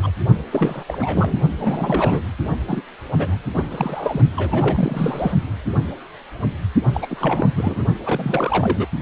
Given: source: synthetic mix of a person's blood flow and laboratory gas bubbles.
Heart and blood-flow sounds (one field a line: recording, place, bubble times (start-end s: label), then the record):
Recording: Doppler ultrasound of blood flow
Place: precordium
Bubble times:
0.03-0.11 s: bubbles
0.52-0.83 s: bubbles
0.88-1.39 s: bubbles
1.59-2.21 s: bubbles
2.67-2.83 s: bubbles
3.17-3.37 s: bubbles
3.54-4.21 s: bubbles
4.33-5.33 s: bubbles
6.94-7.50 s: bubbles
7.55-7.84 s: bubbles
8.05-8.88 s: bubbles
From the record:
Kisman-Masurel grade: 332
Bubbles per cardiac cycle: rolling drumbeat, 9 or more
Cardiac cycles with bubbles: 50 to 99%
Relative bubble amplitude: moderate (0.250 to 0.450)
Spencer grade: 3 (all of the cardiac periods contain showers or single bubble signals, but not dominating or overriding the cardiac motion signals)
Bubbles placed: only in the low amplitude regions of the cardiac cycle